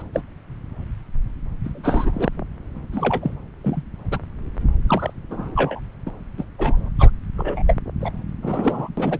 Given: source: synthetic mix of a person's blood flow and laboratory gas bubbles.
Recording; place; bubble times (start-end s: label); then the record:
Doppler ultrasound of blood flow; subclavian vein
0.00-0.03 s: bubbles
0.14-0.22 s: bubbles
1.64-2.29 s: bubbles
2.92-3.35 s: bubbles
3.63-3.83 s: bubbles
4.11-4.19 s: bubbles
4.88-5.13 s: bubbles
5.30-5.80 s: bubbles
6.05-6.12 s: bubbles
6.38-6.44 s: bubbles
6.58-6.89 s: bubbles
6.99-7.10 s: bubbles
7.37-7.62 s: bubbles
7.67-7.76 s: bubbles
8.01-8.12 s: bubbles
8.42-8.89 s: bubbles
8.97-9.20 s: bubbles
From the record:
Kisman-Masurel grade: 242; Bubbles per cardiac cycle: several, 3 to 8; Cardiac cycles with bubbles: 100%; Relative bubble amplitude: moderate (0.250 to 0.450); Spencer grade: 3 (all of the cardiac periods contain showers or single bubble signals, but not dominating or overriding the cardiac motion signals); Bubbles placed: anywhere in the cardiac cycle